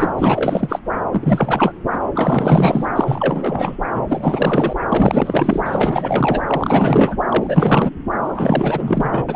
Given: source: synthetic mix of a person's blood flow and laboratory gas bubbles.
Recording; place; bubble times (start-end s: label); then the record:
Doppler ultrasound of blood flow; subclavian vein
0.00-0.11 s: bubbles
0.18-0.79 s: bubbles
1.11-1.73 s: bubbles
1.92-1.98 s: bubbles
2.15-2.90 s: bubbles
2.96-3.77 s: bubbles
3.91-4.04 s: bubbles
4.09-4.74 s: bubbles
4.91-5.61 s: bubbles
5.65-6.42 s: bubbles
6.47-7.17 s: bubbles
7.29-7.90 s: bubbles
8.24-9.24 s: bubbles
9.29-9.36 s: bubbles
From the record:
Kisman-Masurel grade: 444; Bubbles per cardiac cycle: continuous sound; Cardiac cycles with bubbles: 100%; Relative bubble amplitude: maximal (0.775 to 0.999); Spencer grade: 4 (maximum detectable bubble signal sounding continuously throughout systole and diastole of every cardiac period, and overriding the amplitude of the normal cardiac signals); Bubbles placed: anywhere in the cardiac cycle